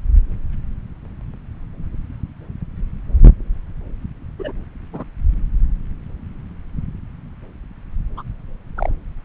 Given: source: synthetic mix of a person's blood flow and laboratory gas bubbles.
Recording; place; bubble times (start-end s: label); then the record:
Doppler ultrasound of blood flow; subclavian vein
4.38-4.52 s: bubbles
4.92-5.04 s: bubbles
8.16-8.22 s: bubbles
8.77-8.91 s: bubbles
From the record:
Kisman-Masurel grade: 122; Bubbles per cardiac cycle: 1 to 2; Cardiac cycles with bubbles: 10 to 50%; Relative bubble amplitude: moderate (0.250 to 0.450); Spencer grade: 2 (many but less than half of the cardiac periods contain bubble signals, singularly or in groups); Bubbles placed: anywhere in the cardiac cycle